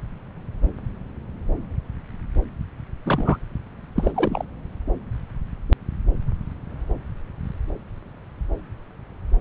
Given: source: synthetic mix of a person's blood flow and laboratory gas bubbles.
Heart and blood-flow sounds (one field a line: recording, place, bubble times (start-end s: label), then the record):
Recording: Doppler ultrasound of blood flow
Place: subclavian vein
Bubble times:
3.05-3.37 s: bubbles
3.96-4.12 s: bubbles
4.14-4.45 s: bubbles
From the record:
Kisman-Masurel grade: 212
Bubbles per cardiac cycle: several, 3 to 8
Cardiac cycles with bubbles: 1 to 10%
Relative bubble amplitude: moderate (0.250 to 0.450)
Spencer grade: 1 (occasional bubble signal discernible with the cardiac motion signal, with majority of cardiac periods free of bubbles)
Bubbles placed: anywhere in the cardiac cycle